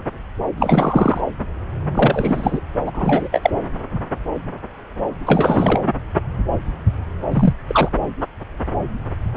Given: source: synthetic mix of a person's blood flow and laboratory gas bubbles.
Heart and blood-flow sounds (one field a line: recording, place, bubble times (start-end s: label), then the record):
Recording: Doppler ultrasound of blood flow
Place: subclavian vein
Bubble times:
0.56-1.21 s: bubbles
1.94-2.60 s: bubbles
2.86-2.91 s: bubbles
2.94-3.50 s: bubbles
5.26-5.80 s: bubbles
7.30-7.54 s: bubbles
7.67-7.88 s: bubbles
From the record:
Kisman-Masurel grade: 223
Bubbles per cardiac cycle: several, 3 to 8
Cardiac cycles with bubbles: 10 to 50%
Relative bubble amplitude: loud (0.450 to 0.775)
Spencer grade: 2 (many but less than half of the cardiac periods contain bubble signals, singularly or in groups)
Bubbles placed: anywhere in the cardiac cycle